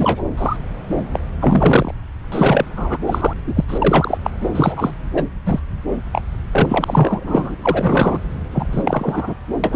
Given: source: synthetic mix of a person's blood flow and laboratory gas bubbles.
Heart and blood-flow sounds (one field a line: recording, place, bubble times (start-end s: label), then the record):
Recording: Doppler ultrasound of blood flow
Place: subclavian vein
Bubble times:
0.00-0.22 s: bubbles
0.37-0.56 s: bubbles
0.97-1.03 s: bubbles
1.13-1.19 s: bubbles
1.41-1.94 s: bubbles
2.31-2.65 s: bubbles
2.76-2.98 s: bubbles
3.06-3.33 s: bubbles
3.47-3.65 s: bubbles
3.68-4.18 s: bubbles
4.23-4.30 s: bubbles
4.55-4.92 s: bubbles
5.14-5.25 s: bubbles
5.45-5.60 s: bubbles
6.12-6.21 s: bubbles
6.52-7.55 s: bubbles
7.62-8.18 s: bubbles
8.51-9.35 s: bubbles
9.63-9.76 s: bubbles
From the record:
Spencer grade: 3 (all of the cardiac periods contain showers or single bubble signals, but not dominating or overriding the cardiac motion signals)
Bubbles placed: anywhere in the cardiac cycle